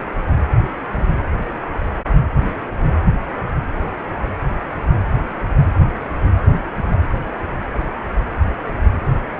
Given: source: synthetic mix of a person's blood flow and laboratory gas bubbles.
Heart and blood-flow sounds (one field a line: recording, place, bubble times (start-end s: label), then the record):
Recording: Doppler ultrasound of blood flow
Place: precordium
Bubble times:
no bubbles
From the record:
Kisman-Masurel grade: 000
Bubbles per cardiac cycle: 0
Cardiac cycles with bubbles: 0%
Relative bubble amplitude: no bubbles discernible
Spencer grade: 0 (complete lack of bubble signals)